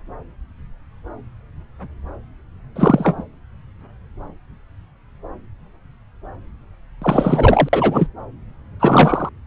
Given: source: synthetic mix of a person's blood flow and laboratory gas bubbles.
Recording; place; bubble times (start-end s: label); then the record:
Doppler ultrasound of blood flow; subclavian vein
2.75-3.23 s: bubbles
7.02-7.69 s: bubbles
7.73-8.08 s: bubbles
8.79-9.29 s: bubbles
From the record:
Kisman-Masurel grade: 223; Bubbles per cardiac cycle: several, 3 to 8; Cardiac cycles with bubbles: 10 to 50%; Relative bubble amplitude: loud (0.450 to 0.775); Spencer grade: 2 (many but less than half of the cardiac periods contain bubble signals, singularly or in groups); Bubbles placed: anywhere in the cardiac cycle